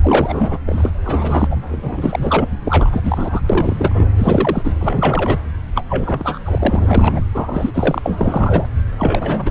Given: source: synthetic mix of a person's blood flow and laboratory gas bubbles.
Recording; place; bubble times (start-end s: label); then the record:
Doppler ultrasound of blood flow; subclavian vein
0.02-0.59 s: bubbles
0.66-0.91 s: bubbles
1.05-1.56 s: bubbles
1.71-2.48 s: bubbles
2.62-3.40 s: bubbles
3.49-4.09 s: bubbles
4.18-4.75 s: bubbles
4.79-5.39 s: bubbles
5.75-5.83 s: bubbles
5.88-6.39 s: bubbles
6.45-7.21 s: bubbles
7.33-8.66 s: bubbles
8.98-9.51 s: bubbles
From the record:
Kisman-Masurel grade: 343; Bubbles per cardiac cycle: rolling drumbeat, 9 or more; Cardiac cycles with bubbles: 100%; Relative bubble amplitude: loud (0.450 to 0.775); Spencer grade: 3 (all of the cardiac periods contain showers or single bubble signals, but not dominating or overriding the cardiac motion signals); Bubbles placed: anywhere in the cardiac cycle